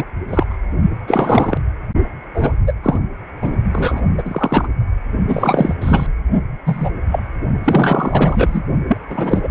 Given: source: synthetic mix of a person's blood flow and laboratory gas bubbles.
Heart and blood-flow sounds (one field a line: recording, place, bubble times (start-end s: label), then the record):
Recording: Doppler ultrasound of blood flow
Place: precordium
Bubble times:
0.00-0.05 s: bubbles
0.29-0.58 s: bubbles
1.08-1.58 s: bubbles
2.34-2.52 s: bubbles
2.67-2.73 s: bubbles
2.83-2.99 s: bubbles
3.42-3.56 s: bubbles
3.73-4.01 s: bubbles
4.17-4.68 s: bubbles
5.27-5.75 s: bubbles
5.81-6.06 s: bubbles
6.66-6.91 s: bubbles
7.11-7.23 s: bubbles
7.63-8.62 s: bubbles
8.88-8.98 s: bubbles
9.10-9.49 s: bubbles
From the record:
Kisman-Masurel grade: 243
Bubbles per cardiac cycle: several, 3 to 8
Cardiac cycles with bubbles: 100%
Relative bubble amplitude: loud (0.450 to 0.775)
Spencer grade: 3 (all of the cardiac periods contain showers or single bubble signals, but not dominating or overriding the cardiac motion signals)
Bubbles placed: only in the low amplitude regions of the cardiac cycle